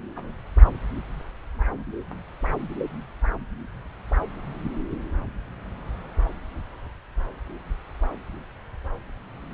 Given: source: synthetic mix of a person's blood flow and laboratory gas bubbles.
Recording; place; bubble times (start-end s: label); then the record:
Doppler ultrasound of blood flow; subclavian vein
0.15-0.32 s: bubbles
From the record:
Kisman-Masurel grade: 111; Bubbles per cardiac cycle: 1 to 2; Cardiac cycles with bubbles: 1 to 10%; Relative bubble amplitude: barely perceptible (0.100 to 0.250); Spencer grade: 1 (occasional bubble signal discernible with the cardiac motion signal, with majority of cardiac periods free of bubbles); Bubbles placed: anywhere in the cardiac cycle